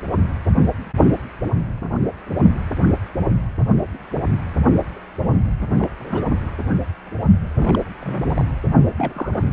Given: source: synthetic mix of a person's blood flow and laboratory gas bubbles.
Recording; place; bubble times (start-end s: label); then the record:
Doppler ultrasound of blood flow; precordium
5.72-5.89 s: bubbles
5.98-6.32 s: bubbles
7.58-7.84 s: bubbles
7.99-8.45 s: bubbles
8.98-9.45 s: bubbles
From the record:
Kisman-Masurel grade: 221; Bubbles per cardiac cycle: several, 3 to 8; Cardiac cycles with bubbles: 10 to 50%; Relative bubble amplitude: barely perceptible (0.100 to 0.250); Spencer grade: 2 (many but less than half of the cardiac periods contain bubble signals, singularly or in groups); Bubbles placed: anywhere in the cardiac cycle